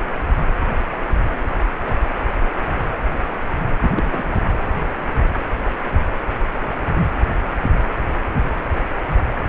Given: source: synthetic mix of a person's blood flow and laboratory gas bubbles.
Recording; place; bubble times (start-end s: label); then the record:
Doppler ultrasound of blood flow; precordium
3.80-3.91 s: bubbles
3.94-4.41 s: bubbles
4.49-4.57 s: bubbles
From the record:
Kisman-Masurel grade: 221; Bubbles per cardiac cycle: several, 3 to 8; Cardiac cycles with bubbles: 10 to 50%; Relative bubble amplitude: barely perceptible (0.100 to 0.250); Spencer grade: 2 (many but less than half of the cardiac periods contain bubble signals, singularly or in groups); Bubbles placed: anywhere in the cardiac cycle